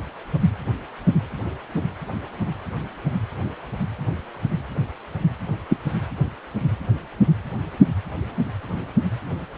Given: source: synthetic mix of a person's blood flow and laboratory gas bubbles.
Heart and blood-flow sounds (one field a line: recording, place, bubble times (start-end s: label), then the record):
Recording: Doppler ultrasound of blood flow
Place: precordium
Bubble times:
5.69-5.77 s: bubbles
From the record:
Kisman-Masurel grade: 113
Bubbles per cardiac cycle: 1 to 2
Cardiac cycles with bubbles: 1 to 10%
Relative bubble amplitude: loud (0.450 to 0.775)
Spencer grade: 1 (occasional bubble signal discernible with the cardiac motion signal, with majority of cardiac periods free of bubbles)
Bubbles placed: anywhere in the cardiac cycle